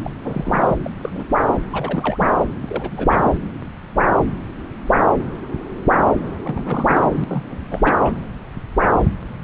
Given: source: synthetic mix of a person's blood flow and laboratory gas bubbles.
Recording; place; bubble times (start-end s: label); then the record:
Doppler ultrasound of blood flow; subclavian vein
0.05-0.10 s: bubbles
0.23-0.76 s: bubbles
0.85-0.90 s: bubbles
1.02-1.25 s: bubbles
1.70-2.27 s: bubbles
2.62-3.32 s: bubbles
6.42-7.11 s: bubbles
7.15-7.24 s: bubbles
7.29-7.44 s: bubbles
7.50-7.58 s: bubbles
7.71-7.94 s: bubbles
8.02-8.15 s: bubbles
From the record:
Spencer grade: 2 (many but less than half of the cardiac periods contain bubble signals, singularly or in groups); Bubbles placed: anywhere in the cardiac cycle